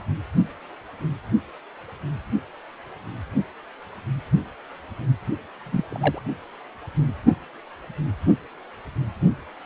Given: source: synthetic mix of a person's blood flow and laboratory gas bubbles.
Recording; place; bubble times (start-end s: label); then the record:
Doppler ultrasound of blood flow; precordium
5.64-6.23 s: bubbles
From the record:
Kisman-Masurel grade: 112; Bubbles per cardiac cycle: 1 to 2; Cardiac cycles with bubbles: 1 to 10%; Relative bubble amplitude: moderate (0.250 to 0.450); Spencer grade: 1 (occasional bubble signal discernible with the cardiac motion signal, with majority of cardiac periods free of bubbles); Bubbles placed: only in the low amplitude regions of the cardiac cycle